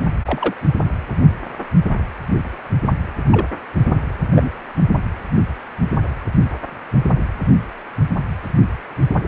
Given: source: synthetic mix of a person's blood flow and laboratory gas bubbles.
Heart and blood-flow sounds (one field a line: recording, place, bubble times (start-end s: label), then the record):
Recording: Doppler ultrasound of blood flow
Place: precordium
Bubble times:
0.25-0.54 s: bubbles
3.31-3.46 s: bubbles
4.31-4.50 s: bubbles
From the record:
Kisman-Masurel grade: 122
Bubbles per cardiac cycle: 1 to 2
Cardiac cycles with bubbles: 10 to 50%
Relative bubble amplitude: moderate (0.250 to 0.450)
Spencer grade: 2 (many but less than half of the cardiac periods contain bubble signals, singularly or in groups)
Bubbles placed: anywhere in the cardiac cycle